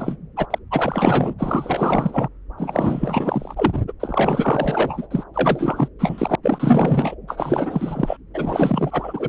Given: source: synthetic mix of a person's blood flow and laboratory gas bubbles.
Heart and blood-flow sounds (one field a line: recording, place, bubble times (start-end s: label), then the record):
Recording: Doppler ultrasound of blood flow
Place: subclavian vein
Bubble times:
0.00-0.17 s: bubbles
0.36-0.46 s: bubbles
0.50-0.58 s: bubbles
0.71-1.34 s: bubbles
1.38-2.29 s: bubbles
2.58-3.79 s: bubbles
3.87-3.92 s: bubbles
4.00-5.08 s: bubbles
5.10-5.23 s: bubbles
5.34-5.88 s: bubbles
5.99-6.35 s: bubbles
6.42-7.15 s: bubbles
7.27-8.17 s: bubbles
8.33-9.29 s: bubbles
From the record:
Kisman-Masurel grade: 444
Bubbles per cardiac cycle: continuous sound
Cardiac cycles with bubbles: 100%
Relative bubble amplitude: maximal (0.775 to 0.999)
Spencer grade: 4 (maximum detectable bubble signal sounding continuously throughout systole and diastole of every cardiac period, and overriding the amplitude of the normal cardiac signals)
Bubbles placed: anywhere in the cardiac cycle